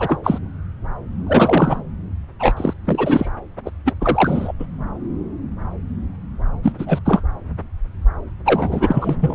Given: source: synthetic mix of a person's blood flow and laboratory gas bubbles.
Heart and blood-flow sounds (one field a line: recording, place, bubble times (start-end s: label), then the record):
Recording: Doppler ultrasound of blood flow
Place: subclavian vein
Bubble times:
0.00-0.19 s: bubbles
0.23-0.39 s: bubbles
1.26-1.81 s: bubbles
2.39-2.73 s: bubbles
2.85-3.29 s: bubbles
3.57-3.59 s: bubbles
3.65-3.71 s: bubbles
3.85-3.94 s: bubbles
4.01-4.53 s: bubbles
4.59-4.66 s: bubbles
6.62-6.72 s: bubbles
6.79-6.99 s: bubbles
7.05-7.21 s: bubbles
8.45-9.17 s: bubbles
9.21-9.35 s: bubbles
From the record:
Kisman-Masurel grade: 333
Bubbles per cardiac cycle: rolling drumbeat, 9 or more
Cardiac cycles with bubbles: 50 to 99%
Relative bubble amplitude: loud (0.450 to 0.775)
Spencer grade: 3 (all of the cardiac periods contain showers or single bubble signals, but not dominating or overriding the cardiac motion signals)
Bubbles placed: anywhere in the cardiac cycle